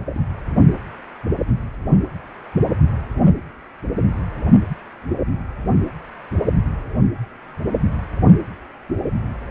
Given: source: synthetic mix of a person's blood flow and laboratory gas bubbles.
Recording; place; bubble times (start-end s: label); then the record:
Doppler ultrasound of blood flow; precordium
0.14-0.22 s: bubbles
From the record:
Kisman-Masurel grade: 221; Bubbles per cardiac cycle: several, 3 to 8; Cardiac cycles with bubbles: 10 to 50%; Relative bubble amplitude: barely perceptible (0.100 to 0.250); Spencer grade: 2 (many but less than half of the cardiac periods contain bubble signals, singularly or in groups); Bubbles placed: anywhere in the cardiac cycle